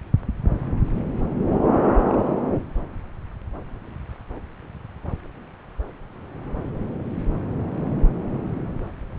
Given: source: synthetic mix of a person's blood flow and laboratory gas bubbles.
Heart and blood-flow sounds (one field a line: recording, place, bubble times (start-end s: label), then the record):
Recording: Doppler ultrasound of blood flow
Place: subclavian vein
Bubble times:
1.82-1.91 s: bubbles
2.02-2.33 s: bubbles
From the record:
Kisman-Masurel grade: 121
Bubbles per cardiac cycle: 1 to 2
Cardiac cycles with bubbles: 10 to 50%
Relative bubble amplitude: barely perceptible (0.100 to 0.250)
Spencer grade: 2 (many but less than half of the cardiac periods contain bubble signals, singularly or in groups)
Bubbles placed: anywhere in the cardiac cycle